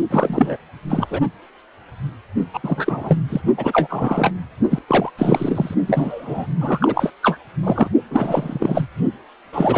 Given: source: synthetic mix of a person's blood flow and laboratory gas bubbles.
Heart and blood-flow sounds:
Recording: Doppler ultrasound of blood flow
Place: precordium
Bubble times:
0.10-0.57 s: bubbles
0.89-1.07 s: bubbles
1.10-1.19 s: bubbles
2.53-2.59 s: bubbles
2.63-3.17 s: bubbles
3.29-3.41 s: bubbles
3.57-4.32 s: bubbles
4.70-4.79 s: bubbles
4.88-5.10 s: bubbles
5.19-5.75 s: bubbles
5.87-6.47 s: bubbles
6.59-7.12 s: bubbles
7.23-7.37 s: bubbles
7.63-7.90 s: bubbles
8.10-8.86 s: bubbles
9.53-9.78 s: bubbles
From the record:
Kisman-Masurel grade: 333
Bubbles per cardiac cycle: rolling drumbeat, 9 or more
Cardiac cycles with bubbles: 50 to 99%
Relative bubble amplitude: loud (0.450 to 0.775)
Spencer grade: 3 (all of the cardiac periods contain showers or single bubble signals, but not dominating or overriding the cardiac motion signals)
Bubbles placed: only in the low amplitude regions of the cardiac cycle

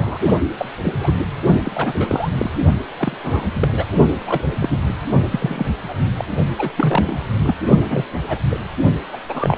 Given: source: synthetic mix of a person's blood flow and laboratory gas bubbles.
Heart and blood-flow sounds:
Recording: Doppler ultrasound of blood flow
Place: precordium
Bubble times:
0.00-0.19 s: bubbles
0.57-0.70 s: bubbles
0.83-0.94 s: bubbles
0.97-1.11 s: bubbles
1.62-2.29 s: bubbles
2.32-2.50 s: bubbles
2.97-3.17 s: bubbles
3.23-3.49 s: bubbles
3.53-3.73 s: bubbles
3.76-3.85 s: bubbles
4.26-4.41 s: bubbles
4.60-4.77 s: bubbles
5.31-5.66 s: bubbles
5.88-5.95 s: bubbles
6.16-6.25 s: bubbles
6.58-6.70 s: bubbles
6.77-7.26 s: bubbles
7.39-7.55 s: bubbles
7.89-8.06 s: bubbles
8.23-8.40 s: bubbles
8.50-8.60 s: bubbles
9.12-9.17 s: bubbles
9.29-9.57 s: bubbles
From the record:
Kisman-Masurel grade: 232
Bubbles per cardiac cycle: several, 3 to 8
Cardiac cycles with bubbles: 50 to 99%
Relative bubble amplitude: moderate (0.250 to 0.450)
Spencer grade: 3 (all of the cardiac periods contain showers or single bubble signals, but not dominating or overriding the cardiac motion signals)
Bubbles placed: only in the low amplitude regions of the cardiac cycle

